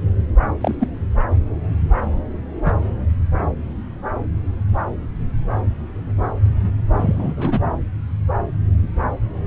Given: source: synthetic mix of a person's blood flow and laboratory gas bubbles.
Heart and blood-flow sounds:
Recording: Doppler ultrasound of blood flow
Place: subclavian vein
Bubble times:
0.61-0.75 s: bubbles
0.80-0.88 s: bubbles
2.66-2.72 s: bubbles
6.97-7.60 s: bubbles
From the record:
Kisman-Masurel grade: 123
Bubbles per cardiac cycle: 1 to 2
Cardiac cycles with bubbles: 10 to 50%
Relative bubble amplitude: loud (0.450 to 0.775)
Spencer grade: 2 (many but less than half of the cardiac periods contain bubble signals, singularly or in groups)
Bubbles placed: anywhere in the cardiac cycle

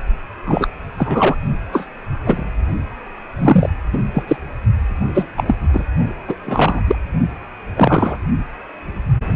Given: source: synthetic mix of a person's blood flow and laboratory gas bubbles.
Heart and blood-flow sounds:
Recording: Doppler ultrasound of blood flow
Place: precordium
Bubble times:
0.46-0.67 s: bubbles
0.98-1.35 s: bubbles
1.72-1.86 s: bubbles
2.24-2.43 s: bubbles
3.38-3.70 s: bubbles
3.93-3.99 s: bubbles
4.13-4.22 s: bubbles
4.27-4.36 s: bubbles
5.14-5.27 s: bubbles
5.37-5.43 s: bubbles
5.46-5.55 s: bubbles
5.73-5.84 s: bubbles
6.27-6.36 s: bubbles
6.46-6.81 s: bubbles
6.87-6.96 s: bubbles
7.76-8.19 s: bubbles
From the record:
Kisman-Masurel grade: 233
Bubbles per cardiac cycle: several, 3 to 8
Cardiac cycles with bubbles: 50 to 99%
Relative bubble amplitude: loud (0.450 to 0.775)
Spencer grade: 3 (all of the cardiac periods contain showers or single bubble signals, but not dominating or overriding the cardiac motion signals)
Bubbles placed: only in the low amplitude regions of the cardiac cycle

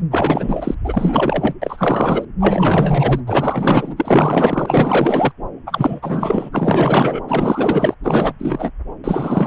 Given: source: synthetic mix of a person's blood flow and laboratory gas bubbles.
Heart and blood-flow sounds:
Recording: Doppler ultrasound of blood flow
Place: subclavian vein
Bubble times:
0.11-0.75 s: bubbles
0.84-1.54 s: bubbles
1.61-2.25 s: bubbles
2.40-3.20 s: bubbles
3.26-5.31 s: bubbles
5.66-6.50 s: bubbles
6.52-7.21 s: bubbles
7.28-7.95 s: bubbles
8.04-8.33 s: bubbles
8.38-8.71 s: bubbles
9.04-9.47 s: bubbles
From the record:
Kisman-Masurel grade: 444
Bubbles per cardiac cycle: continuous sound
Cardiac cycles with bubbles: 100%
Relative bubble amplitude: maximal (0.775 to 0.999)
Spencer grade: 4 (maximum detectable bubble signal sounding continuously throughout systole and diastole of every cardiac period, and overriding the amplitude of the normal cardiac signals)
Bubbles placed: anywhere in the cardiac cycle

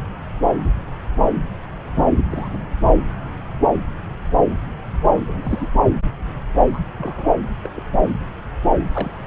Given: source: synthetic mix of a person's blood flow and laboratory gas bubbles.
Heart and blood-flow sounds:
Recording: Doppler ultrasound of blood flow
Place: subclavian vein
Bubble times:
2.29-2.48 s: bubbles
2.53-2.58 s: bubbles
5.15-5.19 s: bubbles
5.26-5.68 s: bubbles
6.65-6.79 s: bubbles
6.97-7.38 s: bubbles
7.63-7.71 s: bubbles
7.75-7.83 s: bubbles
8.78-9.25 s: bubbles
From the record:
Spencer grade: 2 (many but less than half of the cardiac periods contain bubble signals, singularly or in groups)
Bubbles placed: anywhere in the cardiac cycle

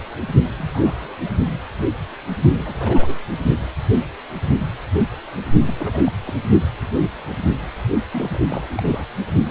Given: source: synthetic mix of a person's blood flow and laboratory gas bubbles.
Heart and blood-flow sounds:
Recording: Doppler ultrasound of blood flow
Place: precordium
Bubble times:
0.58-1.13 s: bubbles
1.25-1.31 s: bubbles
2.51-3.18 s: bubbles
5.67-5.74 s: bubbles
5.79-6.12 s: bubbles
6.25-6.32 s: bubbles
8.12-9.05 s: bubbles
From the record:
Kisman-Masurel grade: 221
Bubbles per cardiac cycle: several, 3 to 8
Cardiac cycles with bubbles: 10 to 50%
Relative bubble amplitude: barely perceptible (0.100 to 0.250)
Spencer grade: 2 (many but less than half of the cardiac periods contain bubble signals, singularly or in groups)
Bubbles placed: only in the low amplitude regions of the cardiac cycle

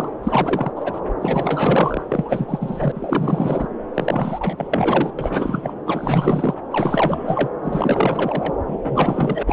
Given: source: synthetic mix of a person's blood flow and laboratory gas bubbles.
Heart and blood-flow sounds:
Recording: Doppler ultrasound of blood flow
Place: subclavian vein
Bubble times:
0.00-0.09 s: bubbles
0.23-0.72 s: bubbles
0.76-1.00 s: bubbles
1.21-2.03 s: bubbles
2.09-3.68 s: bubbles
3.94-4.68 s: bubbles
4.71-5.12 s: bubbles
5.19-5.75 s: bubbles
5.86-6.54 s: bubbles
6.71-7.50 s: bubbles
7.62-8.54 s: bubbles
8.66-9.43 s: bubbles
9.46-9.53 s: bubbles
From the record:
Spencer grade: 4 (maximum detectable bubble signal sounding continuously throughout systole and diastole of every cardiac period, and overriding the amplitude of the normal cardiac signals)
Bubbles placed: anywhere in the cardiac cycle

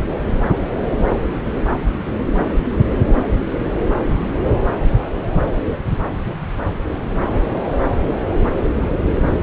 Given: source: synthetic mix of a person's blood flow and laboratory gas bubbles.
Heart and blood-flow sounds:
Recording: Doppler ultrasound of blood flow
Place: subclavian vein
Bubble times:
no bubbles
From the record:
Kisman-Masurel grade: 000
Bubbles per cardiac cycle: 0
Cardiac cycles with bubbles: 0%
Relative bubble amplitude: no bubbles discernible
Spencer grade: 0 (complete lack of bubble signals)

